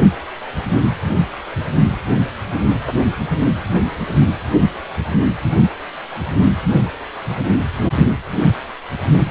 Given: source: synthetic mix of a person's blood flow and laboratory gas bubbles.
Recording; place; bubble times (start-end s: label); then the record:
Doppler ultrasound of blood flow; precordium
no bubbles
From the record:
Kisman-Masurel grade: 000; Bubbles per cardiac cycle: 0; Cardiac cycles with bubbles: 0%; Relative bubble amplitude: no bubbles discernible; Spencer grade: 0 (complete lack of bubble signals)